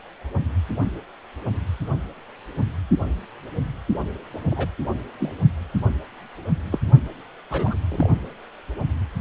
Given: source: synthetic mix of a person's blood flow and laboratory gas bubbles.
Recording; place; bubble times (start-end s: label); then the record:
Doppler ultrasound of blood flow; precordium
4.50-4.67 s: bubbles
5.19-5.31 s: bubbles
6.71-6.78 s: bubbles
7.50-7.77 s: bubbles
7.88-8.10 s: bubbles
From the record:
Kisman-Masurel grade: 122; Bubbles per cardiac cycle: 1 to 2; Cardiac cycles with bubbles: 10 to 50%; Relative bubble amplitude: moderate (0.250 to 0.450); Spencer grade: 2 (many but less than half of the cardiac periods contain bubble signals, singularly or in groups); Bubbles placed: only in the low amplitude regions of the cardiac cycle